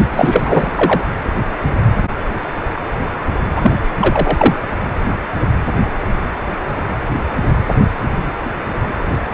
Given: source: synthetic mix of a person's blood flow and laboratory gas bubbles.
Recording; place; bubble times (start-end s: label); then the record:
Doppler ultrasound of blood flow; precordium
0.10-1.04 s: bubbles
3.56-3.73 s: bubbles
3.99-4.55 s: bubbles
From the record:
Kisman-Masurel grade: 223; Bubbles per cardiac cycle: several, 3 to 8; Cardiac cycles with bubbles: 10 to 50%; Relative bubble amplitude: loud (0.450 to 0.775); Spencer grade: 2 (many but less than half of the cardiac periods contain bubble signals, singularly or in groups); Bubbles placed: anywhere in the cardiac cycle